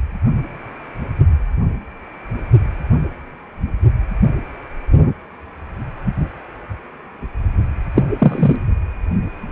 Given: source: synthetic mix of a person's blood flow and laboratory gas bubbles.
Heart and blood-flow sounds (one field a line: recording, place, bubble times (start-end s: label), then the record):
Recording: Doppler ultrasound of blood flow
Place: precordium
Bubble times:
7.96-8.04 s: bubbles
8.18-8.56 s: bubbles
From the record:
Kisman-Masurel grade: 113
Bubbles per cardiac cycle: 1 to 2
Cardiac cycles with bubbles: 1 to 10%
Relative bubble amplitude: loud (0.450 to 0.775)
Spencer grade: 1 (occasional bubble signal discernible with the cardiac motion signal, with majority of cardiac periods free of bubbles)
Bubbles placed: only in the low amplitude regions of the cardiac cycle